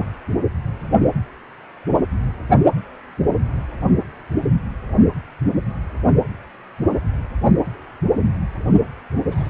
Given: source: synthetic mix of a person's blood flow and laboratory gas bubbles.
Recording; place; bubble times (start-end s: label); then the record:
Doppler ultrasound of blood flow; precordium
2.76-2.88 s: bubbles
9.28-9.49 s: bubbles
From the record:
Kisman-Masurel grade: 121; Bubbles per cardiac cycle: 1 to 2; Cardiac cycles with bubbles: 10 to 50%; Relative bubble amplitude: barely perceptible (0.100 to 0.250); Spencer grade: 2 (many but less than half of the cardiac periods contain bubble signals, singularly or in groups); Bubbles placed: only in the low amplitude regions of the cardiac cycle